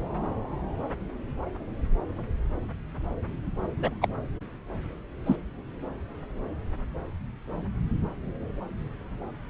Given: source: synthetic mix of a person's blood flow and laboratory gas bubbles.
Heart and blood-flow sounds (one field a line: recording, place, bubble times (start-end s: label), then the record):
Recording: Doppler ultrasound of blood flow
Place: subclavian vein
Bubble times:
3.81-3.93 s: bubbles
4.01-4.08 s: bubbles
5.26-5.36 s: bubbles
From the record:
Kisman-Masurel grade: 122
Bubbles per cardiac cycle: 1 to 2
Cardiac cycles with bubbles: 10 to 50%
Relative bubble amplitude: moderate (0.250 to 0.450)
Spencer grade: 2 (many but less than half of the cardiac periods contain bubble signals, singularly or in groups)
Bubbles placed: anywhere in the cardiac cycle